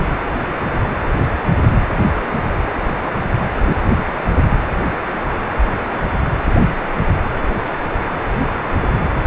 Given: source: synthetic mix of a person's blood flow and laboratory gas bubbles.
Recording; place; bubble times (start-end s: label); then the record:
Doppler ultrasound of blood flow; precordium
no bubbles
From the record:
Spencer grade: 0 (complete lack of bubble signals)